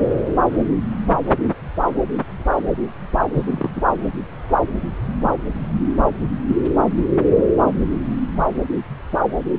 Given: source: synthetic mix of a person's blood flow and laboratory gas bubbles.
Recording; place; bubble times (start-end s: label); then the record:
Doppler ultrasound of blood flow; subclavian vein
3.34-3.68 s: bubbles
3.76-3.81 s: bubbles
From the record:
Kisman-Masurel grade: 222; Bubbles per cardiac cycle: several, 3 to 8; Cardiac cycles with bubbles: 10 to 50%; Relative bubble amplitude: moderate (0.250 to 0.450); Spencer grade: 2 (many but less than half of the cardiac periods contain bubble signals, singularly or in groups); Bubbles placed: anywhere in the cardiac cycle